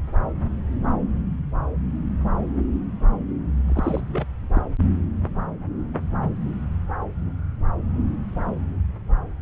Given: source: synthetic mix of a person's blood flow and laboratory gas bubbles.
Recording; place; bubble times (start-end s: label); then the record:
Doppler ultrasound of blood flow; subclavian vein
3.68-4.00 s: bubbles
4.12-4.25 s: bubbles
4.53-4.62 s: bubbles
From the record:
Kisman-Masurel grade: 212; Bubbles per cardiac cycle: several, 3 to 8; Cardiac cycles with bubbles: 1 to 10%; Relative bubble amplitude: moderate (0.250 to 0.450); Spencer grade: 1 (occasional bubble signal discernible with the cardiac motion signal, with majority of cardiac periods free of bubbles); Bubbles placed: anywhere in the cardiac cycle